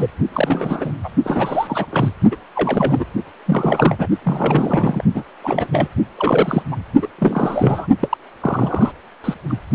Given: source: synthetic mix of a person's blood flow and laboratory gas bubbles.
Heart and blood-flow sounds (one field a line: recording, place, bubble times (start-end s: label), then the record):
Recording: Doppler ultrasound of blood flow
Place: precordium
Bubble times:
0.00-0.10 s: bubbles
0.33-0.92 s: bubbles
1.03-1.09 s: bubbles
1.23-1.86 s: bubbles
1.91-2.09 s: bubbles
2.31-2.37 s: bubbles
2.56-3.06 s: bubbles
3.46-3.96 s: bubbles
3.98-4.07 s: bubbles
4.24-5.04 s: bubbles
5.14-5.23 s: bubbles
5.42-5.68 s: bubbles
5.72-5.88 s: bubbles
6.17-6.63 s: bubbles
6.71-6.76 s: bubbles
7.01-7.08 s: bubbles
7.18-7.86 s: bubbles
7.99-8.17 s: bubbles
8.40-8.91 s: bubbles
9.24-9.34 s: bubbles
9.48-9.57 s: bubbles
From the record:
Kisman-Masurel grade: 342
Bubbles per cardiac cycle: rolling drumbeat, 9 or more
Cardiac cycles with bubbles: 100%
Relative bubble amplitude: moderate (0.250 to 0.450)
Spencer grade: 3 (all of the cardiac periods contain showers or single bubble signals, but not dominating or overriding the cardiac motion signals)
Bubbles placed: only in the low amplitude regions of the cardiac cycle